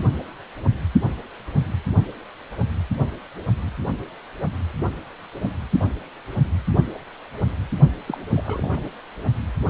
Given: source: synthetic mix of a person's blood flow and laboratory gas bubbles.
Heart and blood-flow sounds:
Doppler ultrasound of blood flow; precordium
8.07-8.17 s: bubbles
8.32-8.41 s: bubbles
8.44-8.89 s: bubbles
From the record:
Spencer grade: 1 (occasional bubble signal discernible with the cardiac motion signal, with majority of cardiac periods free of bubbles); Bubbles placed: only in the low amplitude regions of the cardiac cycle

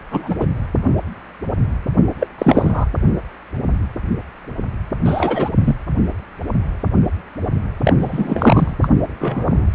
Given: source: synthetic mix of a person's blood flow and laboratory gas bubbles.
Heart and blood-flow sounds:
Doppler ultrasound of blood flow; precordium
0.10-0.36 s: bubbles
0.40-0.46 s: bubbles
2.20-2.27 s: bubbles
2.38-2.86 s: bubbles
5.04-5.50 s: bubbles
5.59-5.75 s: bubbles
7.85-7.93 s: bubbles
7.99-8.75 s: bubbles
8.81-8.88 s: bubbles
9.07-9.65 s: bubbles
From the record:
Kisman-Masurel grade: 223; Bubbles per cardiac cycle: several, 3 to 8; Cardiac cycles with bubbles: 10 to 50%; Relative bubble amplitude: loud (0.450 to 0.775); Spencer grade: 2 (many but less than half of the cardiac periods contain bubble signals, singularly or in groups); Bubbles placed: anywhere in the cardiac cycle

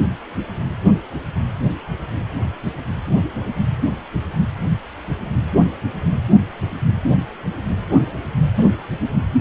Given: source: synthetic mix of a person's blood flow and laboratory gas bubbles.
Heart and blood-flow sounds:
Doppler ultrasound of blood flow; precordium
8.55-8.65 s: bubbles
From the record:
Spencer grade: 1 (occasional bubble signal discernible with the cardiac motion signal, with majority of cardiac periods free of bubbles); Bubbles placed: anywhere in the cardiac cycle

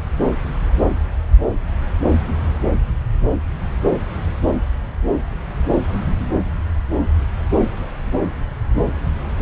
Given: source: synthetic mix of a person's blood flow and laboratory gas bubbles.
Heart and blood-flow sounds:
Doppler ultrasound of blood flow; subclavian vein
1.99-2.04 s: bubbles
2.27-2.35 s: bubbles
From the record:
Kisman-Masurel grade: 111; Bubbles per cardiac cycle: 1 to 2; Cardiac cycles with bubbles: 1 to 10%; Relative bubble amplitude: barely perceptible (0.100 to 0.250); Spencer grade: 1 (occasional bubble signal discernible with the cardiac motion signal, with majority of cardiac periods free of bubbles); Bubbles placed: anywhere in the cardiac cycle

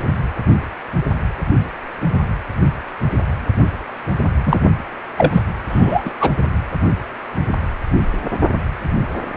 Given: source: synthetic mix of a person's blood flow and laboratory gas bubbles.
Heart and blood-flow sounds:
Doppler ultrasound of blood flow; precordium
4.45-4.60 s: bubbles
5.17-5.42 s: bubbles
5.69-6.13 s: bubbles
6.19-6.31 s: bubbles
From the record:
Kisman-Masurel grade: 223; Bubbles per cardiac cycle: several, 3 to 8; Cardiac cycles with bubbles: 10 to 50%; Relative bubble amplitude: loud (0.450 to 0.775); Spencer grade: 2 (many but less than half of the cardiac periods contain bubble signals, singularly or in groups); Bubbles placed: anywhere in the cardiac cycle

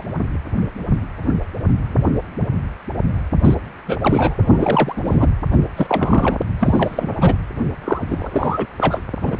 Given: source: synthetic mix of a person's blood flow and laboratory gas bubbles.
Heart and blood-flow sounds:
Doppler ultrasound of blood flow; precordium
3.42-3.54 s: bubbles
3.86-3.98 s: bubbles
4.01-4.35 s: bubbles
4.42-5.29 s: bubbles
5.52-5.57 s: bubbles
5.77-6.39 s: bubbles
6.58-7.08 s: bubbles
7.20-7.36 s: bubbles
7.84-8.66 s: bubbles
8.80-9.02 s: bubbles
9.21-9.37 s: bubbles
From the record:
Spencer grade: 3 (all of the cardiac periods contain showers or single bubble signals, but not dominating or overriding the cardiac motion signals); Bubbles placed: anywhere in the cardiac cycle

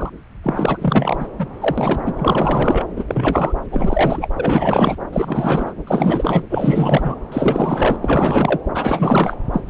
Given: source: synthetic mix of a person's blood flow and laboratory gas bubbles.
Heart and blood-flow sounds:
Doppler ultrasound of blood flow; subclavian vein
0.00-0.09 s: bubbles
0.43-1.28 s: bubbles
1.39-1.46 s: bubbles
1.60-2.00 s: bubbles
2.06-2.14 s: bubbles
2.19-2.86 s: bubbles
2.96-3.05 s: bubbles
3.08-3.53 s: bubbles
3.71-4.29 s: bubbles
4.36-4.96 s: bubbles
5.12-5.74 s: bubbles
5.87-6.43 s: bubbles
6.50-7.15 s: bubbles
7.32-7.98 s: bubbles
8.01-8.59 s: bubbles
8.74-9.36 s: bubbles
9.53-9.63 s: bubbles
9.65-9.69 s: bubbles
From the record:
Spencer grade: 4 (maximum detectable bubble signal sounding continuously throughout systole and diastole of every cardiac period, and overriding the amplitude of the normal cardiac signals); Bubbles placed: anywhere in the cardiac cycle

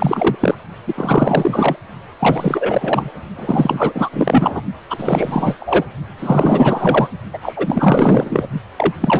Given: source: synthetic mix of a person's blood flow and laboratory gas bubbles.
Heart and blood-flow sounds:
Doppler ultrasound of blood flow; precordium
0.00-0.36 s: bubbles
0.40-0.55 s: bubbles
0.87-1.77 s: bubbles
2.19-3.10 s: bubbles
3.36-4.09 s: bubbles
4.12-4.62 s: bubbles
4.90-5.55 s: bubbles
5.60-5.84 s: bubbles
6.18-7.08 s: bubbles
7.33-7.38 s: bubbles
7.42-8.48 s: bubbles
8.77-8.93 s: bubbles
9.00-9.20 s: bubbles
From the record:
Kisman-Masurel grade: 444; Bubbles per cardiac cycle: continuous sound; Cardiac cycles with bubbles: 100%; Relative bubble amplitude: maximal (0.775 to 0.999); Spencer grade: 4 (maximum detectable bubble signal sounding continuously throughout systole and diastole of every cardiac period, and overriding the amplitude of the normal cardiac signals); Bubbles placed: only in the low amplitude regions of the cardiac cycle

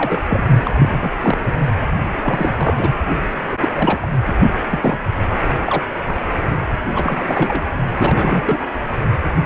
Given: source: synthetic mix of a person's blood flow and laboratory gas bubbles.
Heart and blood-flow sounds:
Doppler ultrasound of blood flow; precordium
0.00-0.21 s: bubbles
0.29-0.45 s: bubbles
0.65-1.16 s: bubbles
1.21-1.38 s: bubbles
2.21-2.94 s: bubbles
3.50-3.57 s: bubbles
3.60-3.69 s: bubbles
3.75-4.07 s: bubbles
4.12-4.20 s: bubbles
4.26-4.34 s: bubbles
4.70-4.98 s: bubbles
5.29-5.38 s: bubbles
5.58-5.83 s: bubbles
6.07-6.12 s: bubbles
6.94-7.23 s: bubbles
7.27-7.63 s: bubbles
7.98-8.58 s: bubbles
9.43-9.46 s: bubbles
From the record:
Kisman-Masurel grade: 342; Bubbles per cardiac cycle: rolling drumbeat, 9 or more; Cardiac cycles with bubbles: 100%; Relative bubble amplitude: moderate (0.250 to 0.450); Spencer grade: 3 (all of the cardiac periods contain showers or single bubble signals, but not dominating or overriding the cardiac motion signals); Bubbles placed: only in the low amplitude regions of the cardiac cycle

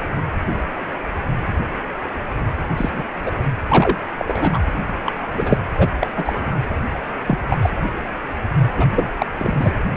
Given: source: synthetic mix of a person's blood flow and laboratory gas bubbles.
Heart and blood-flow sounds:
Doppler ultrasound of blood flow; precordium
2.77-3.03 s: bubbles
3.25-3.31 s: bubbles
3.69-3.97 s: bubbles
4.17-4.59 s: bubbles
5.06-5.13 s: bubbles
5.32-5.58 s: bubbles
5.78-5.88 s: bubbles
6.00-6.07 s: bubbles
6.16-6.58 s: bubbles
7.26-7.38 s: bubbles
7.49-7.57 s: bubbles
7.62-7.70 s: bubbles
8.77-8.87 s: bubbles
8.95-9.11 s: bubbles
9.19-9.26 s: bubbles
9.38-9.73 s: bubbles
From the record:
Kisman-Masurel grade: 233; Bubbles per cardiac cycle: several, 3 to 8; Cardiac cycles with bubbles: 50 to 99%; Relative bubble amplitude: loud (0.450 to 0.775); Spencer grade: 3 (all of the cardiac periods contain showers or single bubble signals, but not dominating or overriding the cardiac motion signals); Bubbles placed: anywhere in the cardiac cycle

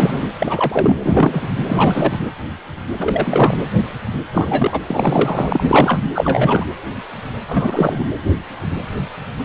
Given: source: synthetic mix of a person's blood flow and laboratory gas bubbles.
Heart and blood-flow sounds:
Doppler ultrasound of blood flow; precordium
0.00-0.28 s: bubbles
0.39-0.97 s: bubbles
1.02-1.51 s: bubbles
1.68-2.19 s: bubbles
2.98-3.57 s: bubbles
4.32-4.82 s: bubbles
4.87-6.00 s: bubbles
6.15-6.66 s: bubbles
7.48-8.09 s: bubbles
From the record:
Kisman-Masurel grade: 333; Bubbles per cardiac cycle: rolling drumbeat, 9 or more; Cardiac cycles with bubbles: 50 to 99%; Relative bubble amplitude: loud (0.450 to 0.775); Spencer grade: 3 (all of the cardiac periods contain showers or single bubble signals, but not dominating or overriding the cardiac motion signals); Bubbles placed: anywhere in the cardiac cycle

